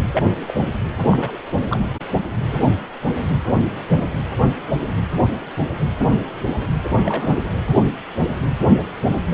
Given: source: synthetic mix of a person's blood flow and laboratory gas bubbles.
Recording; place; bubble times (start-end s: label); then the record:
Doppler ultrasound of blood flow; precordium
0.13-0.34 s: bubbles
0.46-0.54 s: bubbles
1.11-1.38 s: bubbles
1.70-1.79 s: bubbles
7.02-7.49 s: bubbles
From the record:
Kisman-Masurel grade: 221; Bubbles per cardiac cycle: several, 3 to 8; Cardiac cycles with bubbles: 10 to 50%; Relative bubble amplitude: barely perceptible (0.100 to 0.250); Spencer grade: 2 (many but less than half of the cardiac periods contain bubble signals, singularly or in groups); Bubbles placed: anywhere in the cardiac cycle